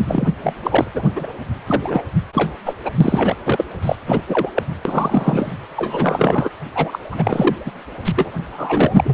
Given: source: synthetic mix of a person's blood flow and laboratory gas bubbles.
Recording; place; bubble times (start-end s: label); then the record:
Doppler ultrasound of blood flow; precordium
0.00-0.31 s: bubbles
0.43-0.53 s: bubbles
0.63-0.91 s: bubbles
0.94-1.09 s: bubbles
1.16-1.28 s: bubbles
1.67-2.02 s: bubbles
2.33-2.54 s: bubbles
2.66-2.74 s: bubbles
2.85-2.91 s: bubbles
3.00-3.41 s: bubbles
3.44-3.64 s: bubbles
3.82-3.96 s: bubbles
4.06-4.22 s: bubbles
4.28-4.50 s: bubbles
4.55-4.63 s: bubbles
4.85-5.55 s: bubbles
5.76-6.50 s: bubbles
6.75-6.99 s: bubbles
7.11-7.71 s: bubbles
8.04-8.12 s: bubbles
8.16-8.31 s: bubbles
8.50-9.01 s: bubbles
9.05-9.14 s: bubbles
From the record:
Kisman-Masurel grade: 342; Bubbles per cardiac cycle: rolling drumbeat, 9 or more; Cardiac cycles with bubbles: 100%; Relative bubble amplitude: moderate (0.250 to 0.450); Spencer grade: 3 (all of the cardiac periods contain showers or single bubble signals, but not dominating or overriding the cardiac motion signals); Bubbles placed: anywhere in the cardiac cycle